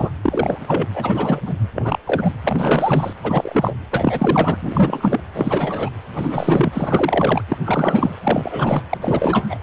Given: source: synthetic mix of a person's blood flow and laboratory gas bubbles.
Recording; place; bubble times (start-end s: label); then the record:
Doppler ultrasound of blood flow; precordium
0.00-0.10 s: bubbles
0.24-0.86 s: bubbles
0.94-1.41 s: bubbles
1.45-1.54 s: bubbles
1.75-1.98 s: bubbles
2.05-2.32 s: bubbles
2.44-3.13 s: bubbles
3.23-3.76 s: bubbles
3.91-4.56 s: bubbles
4.62-5.20 s: bubbles
5.34-5.89 s: bubbles
6.15-7.42 s: bubbles
7.48-7.58 s: bubbles
7.64-8.15 s: bubbles
8.23-8.81 s: bubbles
8.89-8.98 s: bubbles
9.02-9.58 s: bubbles
From the record:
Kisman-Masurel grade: 342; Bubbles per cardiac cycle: rolling drumbeat, 9 or more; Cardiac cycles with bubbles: 100%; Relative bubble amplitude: moderate (0.250 to 0.450); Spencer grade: 3 (all of the cardiac periods contain showers or single bubble signals, but not dominating or overriding the cardiac motion signals); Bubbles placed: anywhere in the cardiac cycle